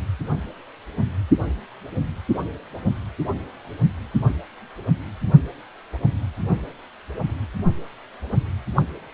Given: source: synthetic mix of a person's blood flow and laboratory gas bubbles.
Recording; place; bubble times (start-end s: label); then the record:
Doppler ultrasound of blood flow; precordium
8.76-8.82 s: bubbles
From the record:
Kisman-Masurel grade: 122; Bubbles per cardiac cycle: 1 to 2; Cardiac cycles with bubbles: 10 to 50%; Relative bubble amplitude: moderate (0.250 to 0.450); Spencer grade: 2 (many but less than half of the cardiac periods contain bubble signals, singularly or in groups); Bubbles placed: only in the low amplitude regions of the cardiac cycle